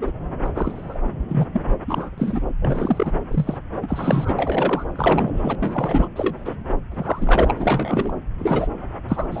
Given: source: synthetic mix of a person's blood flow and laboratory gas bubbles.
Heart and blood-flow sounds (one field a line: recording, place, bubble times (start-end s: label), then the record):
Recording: Doppler ultrasound of blood flow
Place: subclavian vein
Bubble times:
0.01-0.12 s: bubbles
0.45-0.48 s: bubbles
0.54-0.99 s: bubbles
1.28-1.46 s: bubbles
1.52-1.62 s: bubbles
1.87-2.10 s: bubbles
2.17-2.41 s: bubbles
2.60-3.12 s: bubbles
3.30-3.58 s: bubbles
3.82-4.84 s: bubbles
4.96-5.55 s: bubbles
5.60-6.08 s: bubbles
6.15-6.56 s: bubbles
6.91-7.53 s: bubbles
7.56-8.13 s: bubbles
8.39-8.68 s: bubbles
9.08-9.27 s: bubbles
9.31-9.40 s: bubbles
From the record:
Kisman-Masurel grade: 243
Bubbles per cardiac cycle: several, 3 to 8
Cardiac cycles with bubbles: 100%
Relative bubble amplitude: loud (0.450 to 0.775)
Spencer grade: 3 (all of the cardiac periods contain showers or single bubble signals, but not dominating or overriding the cardiac motion signals)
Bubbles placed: anywhere in the cardiac cycle